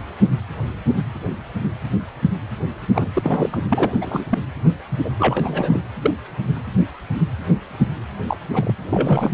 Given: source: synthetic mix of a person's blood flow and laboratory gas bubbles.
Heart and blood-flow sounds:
Doppler ultrasound of blood flow; precordium
2.91-3.10 s: bubbles
3.15-3.58 s: bubbles
3.69-3.93 s: bubbles
4.01-4.25 s: bubbles
4.29-4.38 s: bubbles
4.92-4.98 s: bubbles
5.04-5.11 s: bubbles
5.19-5.82 s: bubbles
6.01-6.11 s: bubbles
8.27-8.37 s: bubbles
8.52-8.75 s: bubbles
8.85-9.30 s: bubbles
From the record:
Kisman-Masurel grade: 332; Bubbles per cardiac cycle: rolling drumbeat, 9 or more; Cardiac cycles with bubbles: 50 to 99%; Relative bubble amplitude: moderate (0.250 to 0.450); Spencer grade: 3 (all of the cardiac periods contain showers or single bubble signals, but not dominating or overriding the cardiac motion signals); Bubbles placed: anywhere in the cardiac cycle

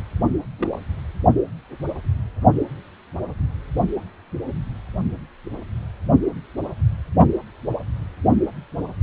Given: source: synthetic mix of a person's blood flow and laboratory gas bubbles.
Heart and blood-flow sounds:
Doppler ultrasound of blood flow; precordium
0.58-0.85 s: bubbles
From the record:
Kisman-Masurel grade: 111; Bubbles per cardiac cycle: 1 to 2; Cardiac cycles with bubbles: 1 to 10%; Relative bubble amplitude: barely perceptible (0.100 to 0.250); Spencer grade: 1 (occasional bubble signal discernible with the cardiac motion signal, with majority of cardiac periods free of bubbles); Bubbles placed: only in the low amplitude regions of the cardiac cycle

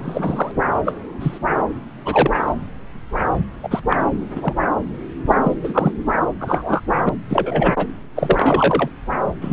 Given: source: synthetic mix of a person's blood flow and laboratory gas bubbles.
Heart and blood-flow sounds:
Doppler ultrasound of blood flow; subclavian vein
0.03-0.52 s: bubbles
0.85-0.93 s: bubbles
1.20-1.39 s: bubbles
2.05-2.52 s: bubbles
3.63-3.80 s: bubbles
3.88-3.96 s: bubbles
4.35-4.54 s: bubbles
5.28-5.34 s: bubbles
5.43-5.55 s: bubbles
5.63-5.92 s: bubbles
6.39-6.80 s: bubbles
7.05-7.09 s: bubbles
7.29-7.87 s: bubbles
8.16-8.90 s: bubbles
9.41-9.53 s: bubbles
From the record:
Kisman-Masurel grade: 243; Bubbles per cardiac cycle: several, 3 to 8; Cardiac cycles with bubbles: 100%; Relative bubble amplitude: loud (0.450 to 0.775); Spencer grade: 3 (all of the cardiac periods contain showers or single bubble signals, but not dominating or overriding the cardiac motion signals); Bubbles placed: anywhere in the cardiac cycle

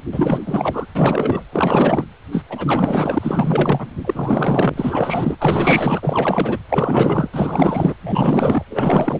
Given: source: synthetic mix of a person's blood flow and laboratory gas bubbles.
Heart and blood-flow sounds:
Doppler ultrasound of blood flow; precordium
0.11-0.42 s: bubbles
0.45-0.86 s: bubbles
0.95-1.44 s: bubbles
1.52-2.04 s: bubbles
2.32-2.44 s: bubbles
2.49-3.88 s: bubbles
4.04-5.36 s: bubbles
5.39-6.58 s: bubbles
6.69-7.30 s: bubbles
7.33-7.95 s: bubbles
8.02-8.64 s: bubbles
8.69-9.19 s: bubbles
From the record:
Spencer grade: 4 (maximum detectable bubble signal sounding continuously throughout systole and diastole of every cardiac period, and overriding the amplitude of the normal cardiac signals); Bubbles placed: anywhere in the cardiac cycle

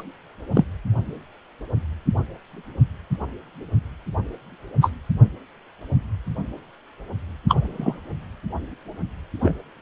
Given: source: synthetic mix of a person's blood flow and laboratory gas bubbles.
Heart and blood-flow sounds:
Doppler ultrasound of blood flow; precordium
0.00-0.03 s: bubbles
0.55-0.64 s: bubbles
4.81-4.91 s: bubbles
7.48-8.01 s: bubbles
9.41-9.54 s: bubbles
From the record:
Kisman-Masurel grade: 123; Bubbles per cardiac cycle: 1 to 2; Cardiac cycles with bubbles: 10 to 50%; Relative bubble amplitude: loud (0.450 to 0.775); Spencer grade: 2 (many but less than half of the cardiac periods contain bubble signals, singularly or in groups); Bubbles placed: only in the low amplitude regions of the cardiac cycle

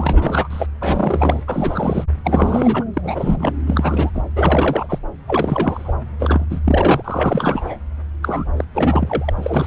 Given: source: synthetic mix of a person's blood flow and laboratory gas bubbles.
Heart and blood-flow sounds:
Doppler ultrasound of blood flow; subclavian vein
0.00-0.67 s: bubbles
0.81-1.43 s: bubbles
1.47-2.04 s: bubbles
2.23-2.84 s: bubbles
2.94-3.55 s: bubbles
3.67-4.11 s: bubbles
4.15-4.22 s: bubbles
4.36-4.99 s: bubbles
5.27-5.93 s: bubbles
6.20-6.45 s: bubbles
6.50-6.60 s: bubbles
6.64-7.77 s: bubbles
8.22-8.45 s: bubbles
8.56-8.64 s: bubbles
8.75-9.34 s: bubbles
9.37-9.67 s: bubbles
From the record:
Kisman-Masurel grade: 342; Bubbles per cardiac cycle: rolling drumbeat, 9 or more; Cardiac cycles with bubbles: 100%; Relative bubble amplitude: moderate (0.250 to 0.450); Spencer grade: 3 (all of the cardiac periods contain showers or single bubble signals, but not dominating or overriding the cardiac motion signals); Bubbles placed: anywhere in the cardiac cycle

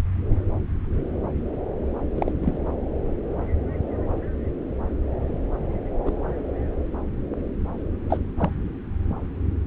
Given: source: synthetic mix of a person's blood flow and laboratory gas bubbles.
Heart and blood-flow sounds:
Doppler ultrasound of blood flow; subclavian vein
2.15-2.31 s: bubbles
2.41-2.57 s: bubbles
6.05-6.12 s: bubbles
8.10-8.17 s: bubbles
8.38-8.50 s: bubbles
From the record:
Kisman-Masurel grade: 122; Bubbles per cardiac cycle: 1 to 2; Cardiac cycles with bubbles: 10 to 50%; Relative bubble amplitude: moderate (0.250 to 0.450); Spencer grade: 2 (many but less than half of the cardiac periods contain bubble signals, singularly or in groups); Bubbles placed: anywhere in the cardiac cycle

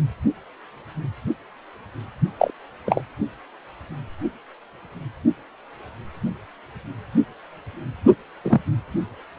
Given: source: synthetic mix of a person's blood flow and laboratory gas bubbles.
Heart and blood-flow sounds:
Doppler ultrasound of blood flow; precordium
2.39-2.50 s: bubbles
2.85-3.00 s: bubbles
8.43-8.59 s: bubbles
From the record:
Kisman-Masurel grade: 123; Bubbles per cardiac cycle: 1 to 2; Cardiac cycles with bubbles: 10 to 50%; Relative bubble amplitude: loud (0.450 to 0.775); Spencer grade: 2 (many but less than half of the cardiac periods contain bubble signals, singularly or in groups); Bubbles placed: only in the low amplitude regions of the cardiac cycle

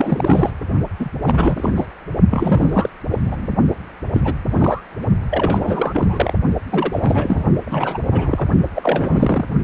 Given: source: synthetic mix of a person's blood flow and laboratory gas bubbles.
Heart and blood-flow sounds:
Doppler ultrasound of blood flow; precordium
0.00-0.51 s: bubbles
0.99-1.09 s: bubbles
1.23-1.73 s: bubbles
1.75-1.90 s: bubbles
2.30-2.90 s: bubbles
3.11-3.19 s: bubbles
3.24-3.50 s: bubbles
4.13-4.21 s: bubbles
4.24-4.33 s: bubbles
4.48-4.85 s: bubbles
5.31-6.33 s: bubbles
6.71-7.43 s: bubbles
7.65-8.03 s: bubbles
8.11-8.47 s: bubbles
8.75-9.45 s: bubbles
From the record:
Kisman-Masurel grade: 342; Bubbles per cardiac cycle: rolling drumbeat, 9 or more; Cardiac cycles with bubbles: 100%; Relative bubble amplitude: moderate (0.250 to 0.450); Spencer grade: 3 (all of the cardiac periods contain showers or single bubble signals, but not dominating or overriding the cardiac motion signals); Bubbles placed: only in the low amplitude regions of the cardiac cycle

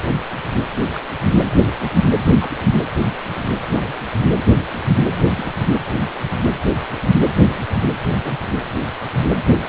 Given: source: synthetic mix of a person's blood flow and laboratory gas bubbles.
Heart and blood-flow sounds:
Doppler ultrasound of blood flow; precordium
0.95-0.99 s: bubbles
1.65-1.68 s: bubbles
1.80-1.92 s: bubbles
2.42-2.49 s: bubbles
3.72-3.94 s: bubbles
3.98-4.04 s: bubbles
5.34-5.46 s: bubbles
8.09-8.21 s: bubbles
8.24-8.33 s: bubbles
From the record:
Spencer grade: 2 (many but less than half of the cardiac periods contain bubble signals, singularly or in groups); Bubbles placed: anywhere in the cardiac cycle

